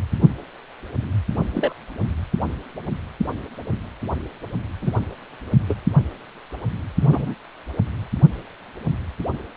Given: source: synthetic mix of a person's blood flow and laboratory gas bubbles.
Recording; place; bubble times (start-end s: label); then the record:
Doppler ultrasound of blood flow; precordium
1.54-1.73 s: bubbles
4.82-4.91 s: bubbles
5.69-5.75 s: bubbles
7.02-7.34 s: bubbles
From the record:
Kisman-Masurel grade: 123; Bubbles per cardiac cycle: 1 to 2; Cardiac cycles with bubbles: 10 to 50%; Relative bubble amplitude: loud (0.450 to 0.775); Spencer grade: 2 (many but less than half of the cardiac periods contain bubble signals, singularly or in groups); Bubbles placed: anywhere in the cardiac cycle